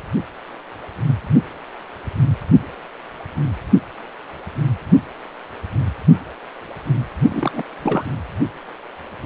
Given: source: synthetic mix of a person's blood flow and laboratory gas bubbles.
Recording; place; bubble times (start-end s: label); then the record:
Doppler ultrasound of blood flow; precordium
7.30-7.62 s: bubbles
7.84-8.04 s: bubbles
From the record:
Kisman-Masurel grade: 222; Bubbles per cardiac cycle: several, 3 to 8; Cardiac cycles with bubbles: 10 to 50%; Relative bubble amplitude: moderate (0.250 to 0.450); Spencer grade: 2 (many but less than half of the cardiac periods contain bubble signals, singularly or in groups); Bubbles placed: anywhere in the cardiac cycle